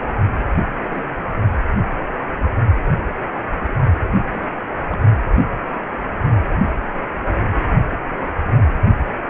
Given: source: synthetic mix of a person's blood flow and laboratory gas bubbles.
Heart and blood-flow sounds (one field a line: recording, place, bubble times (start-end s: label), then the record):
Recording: Doppler ultrasound of blood flow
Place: precordium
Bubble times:
0.81-1.03 s: bubbles
3.63-3.68 s: bubbles
4.29-4.58 s: bubbles
4.88-4.98 s: bubbles
From the record:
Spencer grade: 2 (many but less than half of the cardiac periods contain bubble signals, singularly or in groups)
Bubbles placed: only in the low amplitude regions of the cardiac cycle